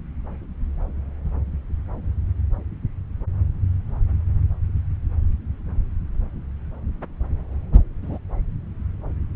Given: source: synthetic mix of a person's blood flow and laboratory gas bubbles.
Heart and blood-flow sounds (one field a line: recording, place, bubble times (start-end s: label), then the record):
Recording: Doppler ultrasound of blood flow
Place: subclavian vein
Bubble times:
8.02-8.18 s: bubbles
From the record:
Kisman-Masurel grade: 111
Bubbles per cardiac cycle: 1 to 2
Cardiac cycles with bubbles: 1 to 10%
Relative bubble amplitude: barely perceptible (0.100 to 0.250)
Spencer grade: 1 (occasional bubble signal discernible with the cardiac motion signal, with majority of cardiac periods free of bubbles)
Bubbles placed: anywhere in the cardiac cycle